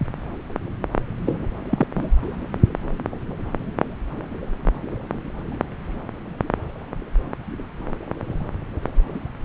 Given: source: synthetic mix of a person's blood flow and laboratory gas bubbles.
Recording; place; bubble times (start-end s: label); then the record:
Doppler ultrasound of blood flow; subclavian vein
1.26-1.37 s: bubbles
1.69-1.87 s: bubbles
1.95-2.10 s: bubbles
From the record:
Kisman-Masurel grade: 212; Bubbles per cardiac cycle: several, 3 to 8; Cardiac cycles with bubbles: 1 to 10%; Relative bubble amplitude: moderate (0.250 to 0.450); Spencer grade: 1 (occasional bubble signal discernible with the cardiac motion signal, with majority of cardiac periods free of bubbles); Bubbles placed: anywhere in the cardiac cycle